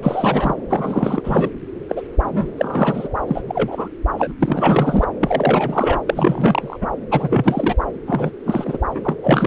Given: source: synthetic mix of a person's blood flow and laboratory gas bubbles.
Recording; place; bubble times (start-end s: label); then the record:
Doppler ultrasound of blood flow; subclavian vein
0.03-0.55 s: bubbles
0.70-1.21 s: bubbles
1.24-1.49 s: bubbles
1.89-2.02 s: bubbles
2.24-3.08 s: bubbles
3.27-3.42 s: bubbles
3.48-3.88 s: bubbles
4.17-4.31 s: bubbles
4.39-5.06 s: bubbles
5.20-6.00 s: bubbles
6.06-6.77 s: bubbles
6.81-6.87 s: bubbles
7.11-7.75 s: bubbles
8.07-8.30 s: bubbles
8.46-8.78 s: bubbles
8.91-9.17 s: bubbles
9.22-9.47 s: bubbles
From the record:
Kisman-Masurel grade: 343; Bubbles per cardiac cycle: rolling drumbeat, 9 or more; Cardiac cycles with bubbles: 100%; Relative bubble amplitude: loud (0.450 to 0.775); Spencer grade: 3 (all of the cardiac periods contain showers or single bubble signals, but not dominating or overriding the cardiac motion signals); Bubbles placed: anywhere in the cardiac cycle